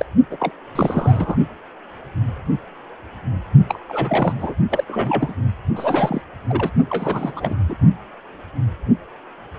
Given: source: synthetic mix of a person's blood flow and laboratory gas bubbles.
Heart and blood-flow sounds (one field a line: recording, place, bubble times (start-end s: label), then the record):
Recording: Doppler ultrasound of blood flow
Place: precordium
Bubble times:
0.00-0.05 s: bubbles
0.30-0.37 s: bubbles
0.40-0.52 s: bubbles
0.75-1.36 s: bubbles
3.69-3.80 s: bubbles
3.89-4.33 s: bubbles
4.38-4.54 s: bubbles
4.70-4.84 s: bubbles
4.88-5.35 s: bubbles
5.76-6.21 s: bubbles
6.48-6.70 s: bubbles
6.90-7.54 s: bubbles
7.69-7.75 s: bubbles
From the record:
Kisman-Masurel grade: 332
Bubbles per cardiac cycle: rolling drumbeat, 9 or more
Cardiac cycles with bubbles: 50 to 99%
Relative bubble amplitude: moderate (0.250 to 0.450)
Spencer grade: 3 (all of the cardiac periods contain showers or single bubble signals, but not dominating or overriding the cardiac motion signals)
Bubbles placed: only in the low amplitude regions of the cardiac cycle